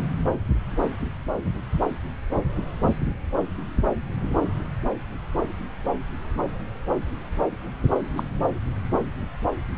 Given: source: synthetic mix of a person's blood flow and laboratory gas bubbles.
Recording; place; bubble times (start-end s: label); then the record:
Doppler ultrasound of blood flow; subclavian vein
8.17-8.23 s: bubbles
8.42-8.47 s: bubbles
From the record:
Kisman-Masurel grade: 122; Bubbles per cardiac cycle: 1 to 2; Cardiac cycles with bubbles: 10 to 50%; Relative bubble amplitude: moderate (0.250 to 0.450); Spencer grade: 2 (many but less than half of the cardiac periods contain bubble signals, singularly or in groups); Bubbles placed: anywhere in the cardiac cycle